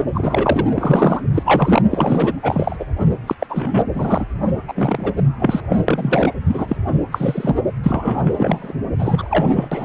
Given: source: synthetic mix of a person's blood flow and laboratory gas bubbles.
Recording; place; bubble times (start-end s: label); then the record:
Doppler ultrasound of blood flow; precordium
0.15-0.66 s: bubbles
0.74-1.21 s: bubbles
1.34-1.82 s: bubbles
1.91-2.33 s: bubbles
2.43-2.77 s: bubbles
2.79-2.84 s: bubbles
3.27-3.35 s: bubbles
3.39-3.47 s: bubbles
3.49-3.82 s: bubbles
3.94-4.25 s: bubbles
4.67-5.12 s: bubbles
5.17-5.22 s: bubbles
5.39-5.60 s: bubbles
5.69-5.78 s: bubbles
5.88-6.34 s: bubbles
6.47-6.76 s: bubbles
7.11-7.55 s: bubbles
7.83-8.73 s: bubbles
8.99-9.69 s: bubbles
9.71-9.85 s: bubbles
From the record:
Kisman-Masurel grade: 243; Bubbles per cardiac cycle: several, 3 to 8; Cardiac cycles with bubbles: 100%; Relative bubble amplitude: loud (0.450 to 0.775); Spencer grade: 3 (all of the cardiac periods contain showers or single bubble signals, but not dominating or overriding the cardiac motion signals); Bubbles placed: anywhere in the cardiac cycle